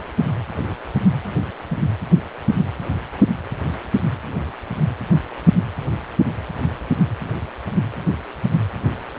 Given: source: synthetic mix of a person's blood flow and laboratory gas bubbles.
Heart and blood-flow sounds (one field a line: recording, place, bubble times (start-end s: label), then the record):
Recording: Doppler ultrasound of blood flow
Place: precordium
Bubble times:
no bubbles
From the record:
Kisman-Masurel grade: 000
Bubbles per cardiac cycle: 0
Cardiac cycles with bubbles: 0%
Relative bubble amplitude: no bubbles discernible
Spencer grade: 0 (complete lack of bubble signals)